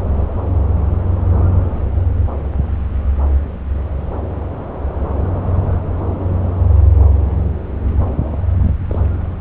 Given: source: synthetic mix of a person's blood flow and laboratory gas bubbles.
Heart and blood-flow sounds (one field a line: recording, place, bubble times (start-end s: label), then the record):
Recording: Doppler ultrasound of blood flow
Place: subclavian vein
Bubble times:
8.51-8.75 s: bubbles
8.88-8.99 s: bubbles
From the record:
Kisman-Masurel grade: 111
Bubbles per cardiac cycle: 1 to 2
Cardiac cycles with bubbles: 1 to 10%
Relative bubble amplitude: barely perceptible (0.100 to 0.250)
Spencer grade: 1 (occasional bubble signal discernible with the cardiac motion signal, with majority of cardiac periods free of bubbles)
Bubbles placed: anywhere in the cardiac cycle